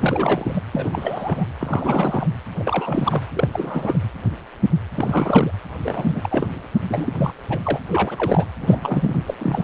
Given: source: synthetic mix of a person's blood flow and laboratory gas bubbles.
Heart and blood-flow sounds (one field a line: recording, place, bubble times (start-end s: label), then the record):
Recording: Doppler ultrasound of blood flow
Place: precordium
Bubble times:
0.00-0.62 s: bubbles
0.73-1.46 s: bubbles
1.58-2.27 s: bubbles
2.58-3.23 s: bubbles
3.33-3.48 s: bubbles
3.52-3.99 s: bubbles
4.95-5.51 s: bubbles
5.80-6.47 s: bubbles
6.88-7.13 s: bubbles
7.18-7.34 s: bubbles
7.50-7.59 s: bubbles
7.65-7.80 s: bubbles
7.87-8.46 s: bubbles
8.60-9.17 s: bubbles
9.27-9.35 s: bubbles
9.38-9.64 s: bubbles
From the record:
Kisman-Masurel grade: 332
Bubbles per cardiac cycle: rolling drumbeat, 9 or more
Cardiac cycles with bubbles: 50 to 99%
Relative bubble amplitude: moderate (0.250 to 0.450)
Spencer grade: 3 (all of the cardiac periods contain showers or single bubble signals, but not dominating or overriding the cardiac motion signals)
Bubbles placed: anywhere in the cardiac cycle